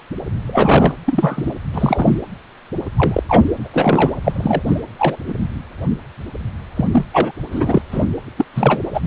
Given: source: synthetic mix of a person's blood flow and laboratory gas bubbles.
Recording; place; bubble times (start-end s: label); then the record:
Doppler ultrasound of blood flow; precordium
0.48-0.94 s: bubbles
1.04-1.53 s: bubbles
1.73-2.23 s: bubbles
2.96-3.23 s: bubbles
3.29-3.45 s: bubbles
3.61-3.68 s: bubbles
3.74-4.15 s: bubbles
4.24-4.32 s: bubbles
4.35-4.62 s: bubbles
4.67-4.80 s: bubbles
4.99-5.17 s: bubbles
5.28-5.34 s: bubbles
6.75-6.86 s: bubbles
6.92-7.05 s: bubbles
7.12-7.31 s: bubbles
7.51-7.82 s: bubbles
7.91-8.06 s: bubbles
8.37-8.45 s: bubbles
8.53-8.81 s: bubbles
8.93-9.00 s: bubbles
From the record:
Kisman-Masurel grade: 233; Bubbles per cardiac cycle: several, 3 to 8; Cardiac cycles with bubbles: 50 to 99%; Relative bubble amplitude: loud (0.450 to 0.775); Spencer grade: 3 (all of the cardiac periods contain showers or single bubble signals, but not dominating or overriding the cardiac motion signals); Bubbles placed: anywhere in the cardiac cycle